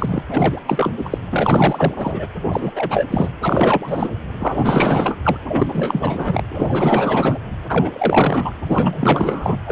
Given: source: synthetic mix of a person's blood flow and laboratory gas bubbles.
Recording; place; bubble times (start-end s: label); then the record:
Doppler ultrasound of blood flow; precordium
0.00-0.23 s: bubbles
0.30-0.60 s: bubbles
0.66-0.92 s: bubbles
0.97-1.18 s: bubbles
1.30-2.27 s: bubbles
2.50-2.71 s: bubbles
2.75-3.06 s: bubbles
3.10-3.29 s: bubbles
3.42-4.13 s: bubbles
4.39-5.16 s: bubbles
5.24-5.38 s: bubbles
5.47-6.43 s: bubbles
6.49-7.39 s: bubbles
7.69-8.56 s: bubbles
8.67-9.57 s: bubbles
9.65-9.72 s: bubbles
From the record:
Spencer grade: 4 (maximum detectable bubble signal sounding continuously throughout systole and diastole of every cardiac period, and overriding the amplitude of the normal cardiac signals); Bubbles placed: anywhere in the cardiac cycle